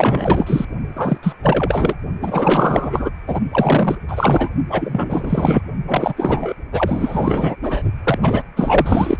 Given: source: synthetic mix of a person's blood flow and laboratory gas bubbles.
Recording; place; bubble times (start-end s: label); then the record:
Doppler ultrasound of blood flow; precordium
0.00-0.65 s: bubbles
0.96-1.18 s: bubbles
1.23-1.33 s: bubbles
1.43-1.97 s: bubbles
2.21-3.10 s: bubbles
3.27-3.41 s: bubbles
3.51-3.97 s: bubbles
4.08-4.50 s: bubbles
4.70-5.62 s: bubbles
5.87-6.54 s: bubbles
6.71-7.56 s: bubbles
7.61-7.82 s: bubbles
8.04-8.19 s: bubbles
8.22-8.44 s: bubbles
8.56-9.17 s: bubbles
From the record:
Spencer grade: 4 (maximum detectable bubble signal sounding continuously throughout systole and diastole of every cardiac period, and overriding the amplitude of the normal cardiac signals); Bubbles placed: only in the low amplitude regions of the cardiac cycle